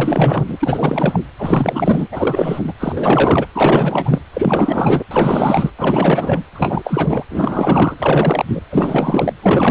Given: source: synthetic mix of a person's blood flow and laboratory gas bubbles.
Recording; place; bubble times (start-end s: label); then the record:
Doppler ultrasound of blood flow; precordium
0.00-0.44 s: bubbles
0.48-1.20 s: bubbles
1.39-2.07 s: bubbles
2.12-2.73 s: bubbles
2.79-3.46 s: bubbles
3.54-4.20 s: bubbles
4.33-5.04 s: bubbles
5.11-5.70 s: bubbles
5.79-6.43 s: bubbles
6.53-7.24 s: bubbles
7.30-8.61 s: bubbles
8.70-9.33 s: bubbles
9.43-9.71 s: bubbles
From the record:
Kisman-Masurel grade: 444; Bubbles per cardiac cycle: continuous sound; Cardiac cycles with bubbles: 100%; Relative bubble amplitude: maximal (0.775 to 0.999); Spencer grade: 4 (maximum detectable bubble signal sounding continuously throughout systole and diastole of every cardiac period, and overriding the amplitude of the normal cardiac signals); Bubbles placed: anywhere in the cardiac cycle